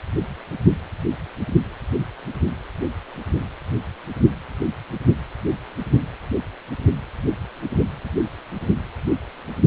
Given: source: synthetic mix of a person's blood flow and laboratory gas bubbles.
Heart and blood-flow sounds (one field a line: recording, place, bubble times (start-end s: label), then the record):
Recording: Doppler ultrasound of blood flow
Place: precordium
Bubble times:
no bubbles
From the record:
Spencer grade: 0 (complete lack of bubble signals)